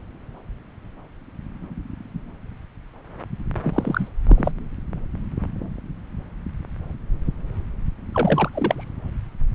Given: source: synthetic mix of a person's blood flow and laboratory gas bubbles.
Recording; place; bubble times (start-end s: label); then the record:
Doppler ultrasound of blood flow; subclavian vein
3.63-4.09 s: bubbles
4.27-4.52 s: bubbles
8.12-8.90 s: bubbles
From the record:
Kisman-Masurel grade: 222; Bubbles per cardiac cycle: several, 3 to 8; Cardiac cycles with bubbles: 10 to 50%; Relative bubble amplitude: moderate (0.250 to 0.450); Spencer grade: 2 (many but less than half of the cardiac periods contain bubble signals, singularly or in groups); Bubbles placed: anywhere in the cardiac cycle